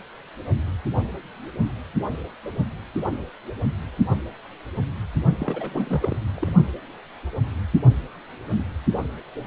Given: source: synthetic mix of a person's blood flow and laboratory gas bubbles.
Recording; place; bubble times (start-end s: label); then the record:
Doppler ultrasound of blood flow; precordium
5.39-6.17 s: bubbles
6.37-6.51 s: bubbles
From the record:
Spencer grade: 1 (occasional bubble signal discernible with the cardiac motion signal, with majority of cardiac periods free of bubbles); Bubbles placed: only in the low amplitude regions of the cardiac cycle